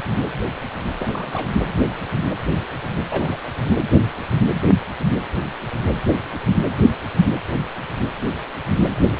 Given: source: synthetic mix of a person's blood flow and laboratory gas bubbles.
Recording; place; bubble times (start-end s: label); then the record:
Doppler ultrasound of blood flow; precordium
0.98-1.48 s: bubbles
3.08-3.38 s: bubbles
From the record:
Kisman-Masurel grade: 221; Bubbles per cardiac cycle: several, 3 to 8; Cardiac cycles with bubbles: 10 to 50%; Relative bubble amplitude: barely perceptible (0.100 to 0.250); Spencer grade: 2 (many but less than half of the cardiac periods contain bubble signals, singularly or in groups); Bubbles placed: anywhere in the cardiac cycle